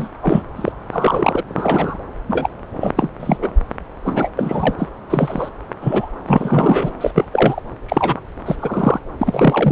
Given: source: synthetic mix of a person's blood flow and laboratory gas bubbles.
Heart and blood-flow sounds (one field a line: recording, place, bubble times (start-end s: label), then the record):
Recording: Doppler ultrasound of blood flow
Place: subclavian vein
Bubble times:
0.00-0.08 s: bubbles
0.22-0.43 s: bubbles
0.56-0.72 s: bubbles
0.92-1.42 s: bubbles
1.49-1.97 s: bubbles
2.29-2.49 s: bubbles
2.81-2.90 s: bubbles
2.96-3.10 s: bubbles
3.20-3.37 s: bubbles
3.42-3.51 s: bubbles
4.05-4.30 s: bubbles
4.36-4.75 s: bubbles
4.78-4.90 s: bubbles
5.10-5.49 s: bubbles
5.81-6.08 s: bubbles
6.27-6.92 s: bubbles
7.00-7.11 s: bubbles
7.15-7.25 s: bubbles
7.32-7.61 s: bubbles
7.88-8.20 s: bubbles
8.46-9.01 s: bubbles
9.19-9.72 s: bubbles
From the record:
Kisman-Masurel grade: 243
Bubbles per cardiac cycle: several, 3 to 8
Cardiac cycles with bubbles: 100%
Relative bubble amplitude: loud (0.450 to 0.775)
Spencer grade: 3 (all of the cardiac periods contain showers or single bubble signals, but not dominating or overriding the cardiac motion signals)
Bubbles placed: anywhere in the cardiac cycle